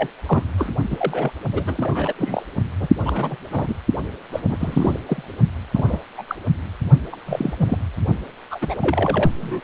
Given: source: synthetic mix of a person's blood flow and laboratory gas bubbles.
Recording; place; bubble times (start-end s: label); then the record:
Doppler ultrasound of blood flow; precordium
0.00-0.10 s: bubbles
0.26-0.43 s: bubbles
0.58-0.72 s: bubbles
0.90-1.32 s: bubbles
1.52-2.14 s: bubbles
2.18-2.46 s: bubbles
2.80-2.88 s: bubbles
3.02-3.37 s: bubbles
3.52-3.75 s: bubbles
4.31-4.40 s: bubbles
4.49-4.98 s: bubbles
5.06-5.23 s: bubbles
5.75-6.00 s: bubbles
6.17-6.22 s: bubbles
6.27-6.35 s: bubbles
7.12-7.16 s: bubbles
7.26-7.54 s: bubbles
7.58-7.78 s: bubbles
8.50-8.58 s: bubbles
8.61-8.75 s: bubbles
8.81-9.30 s: bubbles
9.40-9.61 s: bubbles
From the record:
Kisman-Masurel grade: 242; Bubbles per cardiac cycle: several, 3 to 8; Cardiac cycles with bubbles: 100%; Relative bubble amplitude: moderate (0.250 to 0.450); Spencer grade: 3 (all of the cardiac periods contain showers or single bubble signals, but not dominating or overriding the cardiac motion signals); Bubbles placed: only in the low amplitude regions of the cardiac cycle